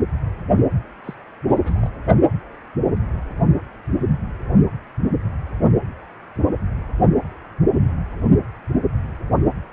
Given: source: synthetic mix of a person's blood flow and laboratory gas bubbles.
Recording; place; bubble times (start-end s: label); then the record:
Doppler ultrasound of blood flow; precordium
1.04-1.15 s: bubbles
1.47-1.90 s: bubbles
From the record:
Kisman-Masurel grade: 211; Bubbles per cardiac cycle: several, 3 to 8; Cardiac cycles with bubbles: 1 to 10%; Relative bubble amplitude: barely perceptible (0.100 to 0.250); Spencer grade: 1 (occasional bubble signal discernible with the cardiac motion signal, with majority of cardiac periods free of bubbles); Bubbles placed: only in the low amplitude regions of the cardiac cycle